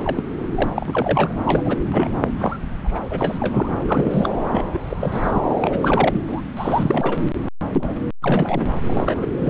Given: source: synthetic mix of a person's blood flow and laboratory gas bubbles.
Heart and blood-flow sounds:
Doppler ultrasound of blood flow; subclavian vein
0.04-0.22 s: bubbles
0.55-0.70 s: bubbles
0.75-1.32 s: bubbles
1.45-1.77 s: bubbles
1.92-2.33 s: bubbles
2.39-2.58 s: bubbles
2.83-2.99 s: bubbles
3.10-4.29 s: bubbles
4.53-4.62 s: bubbles
4.73-4.79 s: bubbles
4.91-4.97 s: bubbles
5.00-5.55 s: bubbles
5.59-6.21 s: bubbles
6.28-6.41 s: bubbles
6.57-7.24 s: bubbles
7.73-7.96 s: bubbles
8.22-8.69 s: bubbles
8.80-9.26 s: bubbles
9.38-9.50 s: bubbles
From the record:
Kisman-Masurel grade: 342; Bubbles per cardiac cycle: rolling drumbeat, 9 or more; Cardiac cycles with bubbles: 100%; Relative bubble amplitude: moderate (0.250 to 0.450); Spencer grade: 3 (all of the cardiac periods contain showers or single bubble signals, but not dominating or overriding the cardiac motion signals); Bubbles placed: anywhere in the cardiac cycle

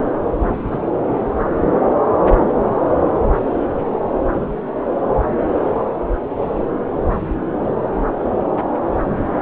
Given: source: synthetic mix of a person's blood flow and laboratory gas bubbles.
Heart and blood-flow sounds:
Doppler ultrasound of blood flow; subclavian vein
0.71-0.80 s: bubbles
From the record:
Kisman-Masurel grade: 112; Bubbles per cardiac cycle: 1 to 2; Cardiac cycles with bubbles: 1 to 10%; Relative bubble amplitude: moderate (0.250 to 0.450); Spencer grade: 1 (occasional bubble signal discernible with the cardiac motion signal, with majority of cardiac periods free of bubbles); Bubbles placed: anywhere in the cardiac cycle

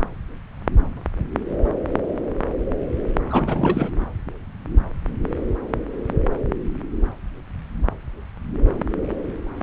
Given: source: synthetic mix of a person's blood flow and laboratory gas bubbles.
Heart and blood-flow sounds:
Doppler ultrasound of blood flow; subclavian vein
3.30-3.89 s: bubbles
From the record:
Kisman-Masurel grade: 212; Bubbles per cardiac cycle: several, 3 to 8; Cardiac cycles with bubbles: 1 to 10%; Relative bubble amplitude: moderate (0.250 to 0.450); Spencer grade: 1 (occasional bubble signal discernible with the cardiac motion signal, with majority of cardiac periods free of bubbles); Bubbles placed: anywhere in the cardiac cycle

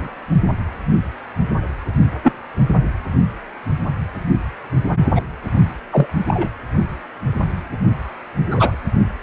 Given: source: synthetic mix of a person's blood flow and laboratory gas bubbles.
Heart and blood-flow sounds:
Doppler ultrasound of blood flow; precordium
0.00-0.08 s: bubbles
2.23-2.33 s: bubbles
5.15-5.22 s: bubbles
5.91-6.06 s: bubbles
6.27-6.50 s: bubbles
8.51-8.76 s: bubbles
From the record:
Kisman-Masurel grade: 123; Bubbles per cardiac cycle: 1 to 2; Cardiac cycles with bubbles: 10 to 50%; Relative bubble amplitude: loud (0.450 to 0.775); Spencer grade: 2 (many but less than half of the cardiac periods contain bubble signals, singularly or in groups); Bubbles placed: only in the low amplitude regions of the cardiac cycle

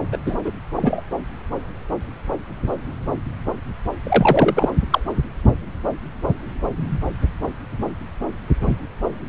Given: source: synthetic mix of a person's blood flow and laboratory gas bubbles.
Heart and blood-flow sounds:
Doppler ultrasound of blood flow; subclavian vein
0.11-0.17 s: bubbles
0.26-0.35 s: bubbles
0.45-0.52 s: bubbles
0.76-1.02 s: bubbles
4.04-4.71 s: bubbles
4.90-5.00 s: bubbles
From the record:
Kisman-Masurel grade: 223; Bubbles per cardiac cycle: several, 3 to 8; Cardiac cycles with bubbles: 10 to 50%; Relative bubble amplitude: loud (0.450 to 0.775); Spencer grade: 2 (many but less than half of the cardiac periods contain bubble signals, singularly or in groups); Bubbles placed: anywhere in the cardiac cycle

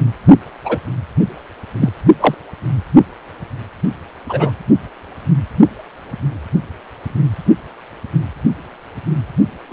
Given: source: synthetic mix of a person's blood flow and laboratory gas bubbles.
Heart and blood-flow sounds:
Doppler ultrasound of blood flow; precordium
0.64-0.79 s: bubbles
1.81-1.90 s: bubbles
2.20-2.35 s: bubbles
4.29-4.51 s: bubbles
9.71-9.73 s: bubbles
From the record:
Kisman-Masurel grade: 123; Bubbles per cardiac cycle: 1 to 2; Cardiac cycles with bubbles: 10 to 50%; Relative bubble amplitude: loud (0.450 to 0.775); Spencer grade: 2 (many but less than half of the cardiac periods contain bubble signals, singularly or in groups); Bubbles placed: only in the low amplitude regions of the cardiac cycle

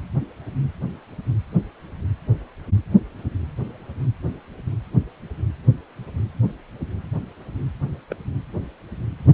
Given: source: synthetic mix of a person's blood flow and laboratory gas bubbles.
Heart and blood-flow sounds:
Doppler ultrasound of blood flow; precordium
8.10-8.15 s: bubbles
From the record:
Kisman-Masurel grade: 111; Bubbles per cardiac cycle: 1 to 2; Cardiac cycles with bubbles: 1 to 10%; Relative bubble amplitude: barely perceptible (0.100 to 0.250); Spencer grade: 1 (occasional bubble signal discernible with the cardiac motion signal, with majority of cardiac periods free of bubbles); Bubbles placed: anywhere in the cardiac cycle

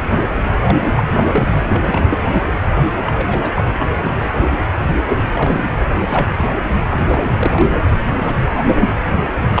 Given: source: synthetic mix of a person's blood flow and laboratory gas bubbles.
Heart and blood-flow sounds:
Doppler ultrasound of blood flow; precordium
0.64-0.78 s: bubbles
0.95-1.03 s: bubbles
1.16-1.23 s: bubbles
1.32-1.48 s: bubbles
1.68-2.50 s: bubbles
3.02-3.12 s: bubbles
3.16-3.52 s: bubbles
3.55-3.64 s: bubbles
3.74-3.87 s: bubbles
4.01-4.08 s: bubbles
4.21-4.58 s: bubbles
4.63-4.68 s: bubbles
5.04-5.73 s: bubbles
6.08-6.49 s: bubbles
6.89-7.32 s: bubbles
7.37-7.65 s: bubbles
8.18-8.36 s: bubbles
8.73-8.86 s: bubbles
9.50-9.60 s: bubbles
From the record:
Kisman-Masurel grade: 232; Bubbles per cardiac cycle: several, 3 to 8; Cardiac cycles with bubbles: 50 to 99%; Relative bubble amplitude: moderate (0.250 to 0.450); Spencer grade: 3 (all of the cardiac periods contain showers or single bubble signals, but not dominating or overriding the cardiac motion signals); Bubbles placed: anywhere in the cardiac cycle

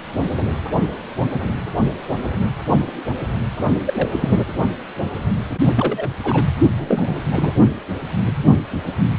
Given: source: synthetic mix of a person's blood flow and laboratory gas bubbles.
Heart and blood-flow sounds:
Doppler ultrasound of blood flow; precordium
3.85-4.40 s: bubbles
5.76-6.10 s: bubbles
6.23-6.45 s: bubbles
6.77-7.21 s: bubbles
7.31-7.53 s: bubbles
From the record:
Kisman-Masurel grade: 232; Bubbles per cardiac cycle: several, 3 to 8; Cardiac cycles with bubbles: 50 to 99%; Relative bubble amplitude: moderate (0.250 to 0.450); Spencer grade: 3 (all of the cardiac periods contain showers or single bubble signals, but not dominating or overriding the cardiac motion signals); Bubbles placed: only in the low amplitude regions of the cardiac cycle

